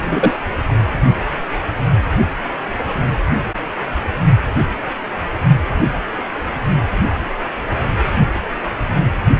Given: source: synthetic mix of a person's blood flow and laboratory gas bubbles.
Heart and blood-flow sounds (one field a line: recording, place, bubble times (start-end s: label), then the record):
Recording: Doppler ultrasound of blood flow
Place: precordium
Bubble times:
0.05-0.37 s: bubbles
0.69-0.73 s: bubbles
From the record:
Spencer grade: 1 (occasional bubble signal discernible with the cardiac motion signal, with majority of cardiac periods free of bubbles)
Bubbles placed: anywhere in the cardiac cycle